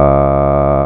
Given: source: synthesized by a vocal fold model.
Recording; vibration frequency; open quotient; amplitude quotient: sustained vowel; 70 Hz; 0.4; 1.1